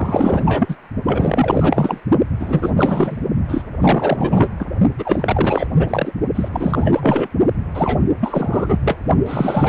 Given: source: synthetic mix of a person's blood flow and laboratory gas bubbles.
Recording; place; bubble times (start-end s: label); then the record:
Doppler ultrasound of blood flow; precordium
0.00-0.76 s: bubbles
1.05-2.00 s: bubbles
2.40-2.74 s: bubbles
2.76-3.19 s: bubbles
3.48-3.64 s: bubbles
3.81-4.49 s: bubbles
4.58-4.67 s: bubbles
4.98-5.67 s: bubbles
5.78-6.12 s: bubbles
6.34-7.28 s: bubbles
7.74-7.99 s: bubbles
8.20-8.79 s: bubbles
8.84-8.98 s: bubbles
9.26-9.69 s: bubbles
From the record:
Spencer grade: 4 (maximum detectable bubble signal sounding continuously throughout systole and diastole of every cardiac period, and overriding the amplitude of the normal cardiac signals); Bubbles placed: only in the low amplitude regions of the cardiac cycle